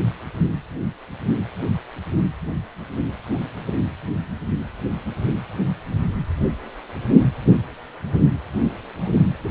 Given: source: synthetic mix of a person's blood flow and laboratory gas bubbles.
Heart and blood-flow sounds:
Doppler ultrasound of blood flow; precordium
9.41-9.51 s: bubbles
From the record:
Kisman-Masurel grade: 112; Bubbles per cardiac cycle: 1 to 2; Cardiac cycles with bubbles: 1 to 10%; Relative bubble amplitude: moderate (0.250 to 0.450); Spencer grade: 1 (occasional bubble signal discernible with the cardiac motion signal, with majority of cardiac periods free of bubbles); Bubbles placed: anywhere in the cardiac cycle

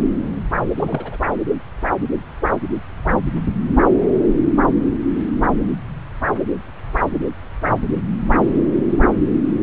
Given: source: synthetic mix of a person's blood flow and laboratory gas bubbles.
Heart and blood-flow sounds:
Doppler ultrasound of blood flow; subclavian vein
0.76-1.17 s: bubbles
From the record:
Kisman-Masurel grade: 211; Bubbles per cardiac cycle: several, 3 to 8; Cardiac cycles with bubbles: 1 to 10%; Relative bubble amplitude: barely perceptible (0.100 to 0.250); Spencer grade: 1 (occasional bubble signal discernible with the cardiac motion signal, with majority of cardiac periods free of bubbles); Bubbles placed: anywhere in the cardiac cycle

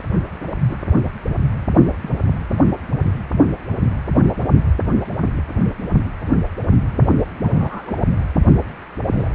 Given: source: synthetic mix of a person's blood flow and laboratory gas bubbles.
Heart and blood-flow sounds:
Doppler ultrasound of blood flow; precordium
0.60-0.77 s: bubbles
2.03-2.13 s: bubbles
2.49-2.58 s: bubbles
7.42-8.00 s: bubbles
9.10-9.30 s: bubbles
From the record:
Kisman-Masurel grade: 121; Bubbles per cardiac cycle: 1 to 2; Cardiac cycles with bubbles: 10 to 50%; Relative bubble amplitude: barely perceptible (0.100 to 0.250); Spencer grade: 2 (many but less than half of the cardiac periods contain bubble signals, singularly or in groups); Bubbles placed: only in the low amplitude regions of the cardiac cycle

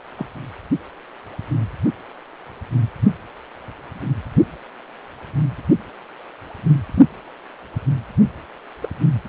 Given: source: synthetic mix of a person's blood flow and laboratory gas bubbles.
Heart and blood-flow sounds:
Doppler ultrasound of blood flow; precordium
0.16-0.26 s: bubbles
6.94-7.06 s: bubbles
8.82-8.88 s: bubbles
From the record:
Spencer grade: 2 (many but less than half of the cardiac periods contain bubble signals, singularly or in groups); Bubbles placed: anywhere in the cardiac cycle

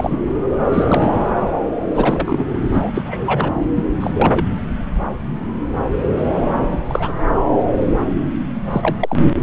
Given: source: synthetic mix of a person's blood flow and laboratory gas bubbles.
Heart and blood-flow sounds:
Doppler ultrasound of blood flow; subclavian vein
0.00-0.17 s: bubbles
0.72-1.12 s: bubbles
1.95-2.48 s: bubbles
2.72-2.90 s: bubbles
2.94-3.02 s: bubbles
3.05-3.53 s: bubbles
3.71-3.83 s: bubbles
4.00-4.45 s: bubbles
6.71-6.78 s: bubbles
6.88-7.13 s: bubbles
8.71-8.96 s: bubbles
9.00-9.17 s: bubbles
From the record:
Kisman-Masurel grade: 222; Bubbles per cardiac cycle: several, 3 to 8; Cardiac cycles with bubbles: 10 to 50%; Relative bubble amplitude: moderate (0.250 to 0.450); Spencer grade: 2 (many but less than half of the cardiac periods contain bubble signals, singularly or in groups); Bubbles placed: anywhere in the cardiac cycle

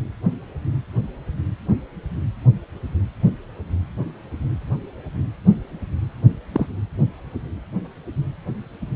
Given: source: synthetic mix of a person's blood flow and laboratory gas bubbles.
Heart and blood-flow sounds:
Doppler ultrasound of blood flow; precordium
6.52-6.66 s: bubbles
From the record:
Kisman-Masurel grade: 112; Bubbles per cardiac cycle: 1 to 2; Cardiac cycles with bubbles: 1 to 10%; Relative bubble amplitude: moderate (0.250 to 0.450); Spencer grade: 1 (occasional bubble signal discernible with the cardiac motion signal, with majority of cardiac periods free of bubbles); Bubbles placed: anywhere in the cardiac cycle

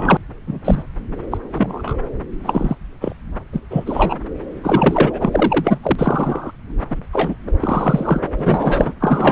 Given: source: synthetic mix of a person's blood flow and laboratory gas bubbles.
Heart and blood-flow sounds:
Doppler ultrasound of blood flow; subclavian vein
0.00-0.17 s: bubbles
0.47-0.59 s: bubbles
0.65-0.84 s: bubbles
1.30-1.38 s: bubbles
1.54-1.98 s: bubbles
2.43-2.75 s: bubbles
3.00-3.13 s: bubbles
3.52-3.60 s: bubbles
3.70-4.16 s: bubbles
4.63-5.78 s: bubbles
5.82-6.52 s: bubbles
6.90-7.03 s: bubbles
7.13-7.35 s: bubbles
7.46-7.52 s: bubbles
7.60-8.21 s: bubbles
8.38-8.92 s: bubbles
9.00-9.32 s: bubbles
From the record:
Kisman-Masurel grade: 243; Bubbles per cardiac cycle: several, 3 to 8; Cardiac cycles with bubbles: 100%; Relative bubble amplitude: loud (0.450 to 0.775); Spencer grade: 3 (all of the cardiac periods contain showers or single bubble signals, but not dominating or overriding the cardiac motion signals); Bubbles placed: anywhere in the cardiac cycle

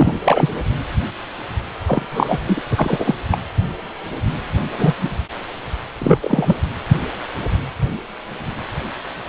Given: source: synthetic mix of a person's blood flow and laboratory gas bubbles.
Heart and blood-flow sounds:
Doppler ultrasound of blood flow; precordium
0.00-0.16 s: bubbles
0.24-0.49 s: bubbles
1.86-2.05 s: bubbles
2.10-2.39 s: bubbles
2.46-2.62 s: bubbles
2.71-3.15 s: bubbles
3.31-3.38 s: bubbles
4.71-4.94 s: bubbles
5.02-5.10 s: bubbles
5.99-6.59 s: bubbles
From the record:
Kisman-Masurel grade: 233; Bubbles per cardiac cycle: several, 3 to 8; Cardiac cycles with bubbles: 50 to 99%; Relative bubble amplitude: loud (0.450 to 0.775); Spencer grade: 3 (all of the cardiac periods contain showers or single bubble signals, but not dominating or overriding the cardiac motion signals); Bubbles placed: anywhere in the cardiac cycle

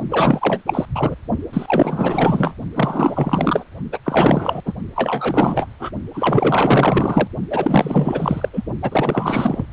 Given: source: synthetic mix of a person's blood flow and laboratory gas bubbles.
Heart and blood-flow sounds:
Doppler ultrasound of blood flow; precordium
0.09-0.62 s: bubbles
0.66-0.85 s: bubbles
0.95-1.16 s: bubbles
1.52-2.54 s: bubbles
2.75-3.64 s: bubbles
3.92-3.99 s: bubbles
4.04-4.61 s: bubbles
4.65-4.73 s: bubbles
4.96-5.67 s: bubbles
5.79-5.91 s: bubbles
6.13-7.28 s: bubbles
7.50-8.48 s: bubbles
8.53-8.63 s: bubbles
8.82-9.65 s: bubbles
From the record:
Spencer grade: 4 (maximum detectable bubble signal sounding continuously throughout systole and diastole of every cardiac period, and overriding the amplitude of the normal cardiac signals); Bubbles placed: only in the low amplitude regions of the cardiac cycle

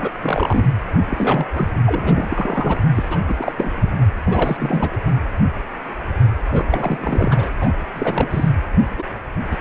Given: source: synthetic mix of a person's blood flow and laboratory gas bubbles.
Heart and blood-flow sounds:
Doppler ultrasound of blood flow; precordium
0.00-0.12 s: bubbles
0.23-0.65 s: bubbles
1.09-1.46 s: bubbles
1.52-1.68 s: bubbles
1.86-2.80 s: bubbles
2.95-3.20 s: bubbles
3.28-3.35 s: bubbles
3.38-3.53 s: bubbles
3.56-3.72 s: bubbles
3.76-3.90 s: bubbles
4.26-4.97 s: bubbles
6.50-6.65 s: bubbles
6.70-7.49 s: bubbles
7.61-7.71 s: bubbles
7.95-8.28 s: bubbles
8.30-8.49 s: bubbles
8.98-9.04 s: bubbles
9.51-9.57 s: bubbles
From the record:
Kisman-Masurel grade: 332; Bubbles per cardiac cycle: rolling drumbeat, 9 or more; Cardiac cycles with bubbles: 50 to 99%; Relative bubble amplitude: moderate (0.250 to 0.450); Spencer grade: 3 (all of the cardiac periods contain showers or single bubble signals, but not dominating or overriding the cardiac motion signals); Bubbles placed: anywhere in the cardiac cycle

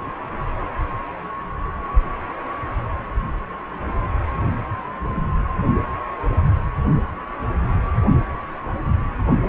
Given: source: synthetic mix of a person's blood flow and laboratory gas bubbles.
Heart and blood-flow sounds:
Doppler ultrasound of blood flow; precordium
no bubbles
From the record:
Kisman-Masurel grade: 000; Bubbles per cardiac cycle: 0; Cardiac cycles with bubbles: 0%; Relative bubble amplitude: no bubbles discernible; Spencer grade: 0 (complete lack of bubble signals)

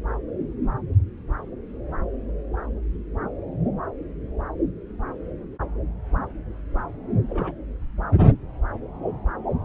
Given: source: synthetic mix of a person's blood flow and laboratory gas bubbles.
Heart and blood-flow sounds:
Doppler ultrasound of blood flow; subclavian vein
7.29-7.54 s: bubbles
From the record:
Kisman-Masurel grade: 121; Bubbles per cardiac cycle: 1 to 2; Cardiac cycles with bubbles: 10 to 50%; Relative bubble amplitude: barely perceptible (0.100 to 0.250); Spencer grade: 2 (many but less than half of the cardiac periods contain bubble signals, singularly or in groups); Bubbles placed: anywhere in the cardiac cycle

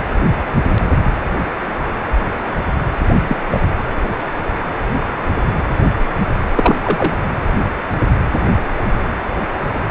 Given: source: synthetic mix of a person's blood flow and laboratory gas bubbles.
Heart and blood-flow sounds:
Doppler ultrasound of blood flow; precordium
3.28-3.37 s: bubbles
3.50-3.61 s: bubbles
6.55-6.75 s: bubbles
6.83-7.13 s: bubbles
From the record:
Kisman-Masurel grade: 123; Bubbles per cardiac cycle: 1 to 2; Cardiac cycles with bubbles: 10 to 50%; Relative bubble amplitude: loud (0.450 to 0.775); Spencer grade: 2 (many but less than half of the cardiac periods contain bubble signals, singularly or in groups); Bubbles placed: anywhere in the cardiac cycle

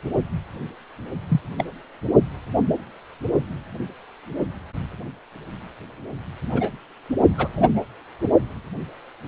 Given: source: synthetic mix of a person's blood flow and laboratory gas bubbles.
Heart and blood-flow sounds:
Doppler ultrasound of blood flow; precordium
1.28-1.40 s: bubbles
1.58-1.65 s: bubbles
6.53-6.70 s: bubbles
7.38-7.48 s: bubbles
7.56-7.80 s: bubbles
From the record:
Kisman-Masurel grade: 122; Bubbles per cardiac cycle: 1 to 2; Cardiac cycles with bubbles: 10 to 50%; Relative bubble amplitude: moderate (0.250 to 0.450); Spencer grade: 2 (many but less than half of the cardiac periods contain bubble signals, singularly or in groups); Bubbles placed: only in the low amplitude regions of the cardiac cycle

